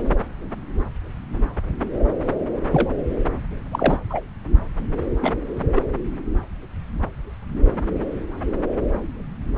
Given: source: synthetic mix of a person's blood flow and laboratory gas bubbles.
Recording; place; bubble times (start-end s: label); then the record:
Doppler ultrasound of blood flow; subclavian vein
0.00-0.02 s: bubbles
2.72-2.90 s: bubbles
3.71-3.97 s: bubbles
4.10-4.21 s: bubbles
5.21-5.34 s: bubbles
5.75-5.82 s: bubbles
From the record:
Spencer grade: 2 (many but less than half of the cardiac periods contain bubble signals, singularly or in groups); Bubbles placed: anywhere in the cardiac cycle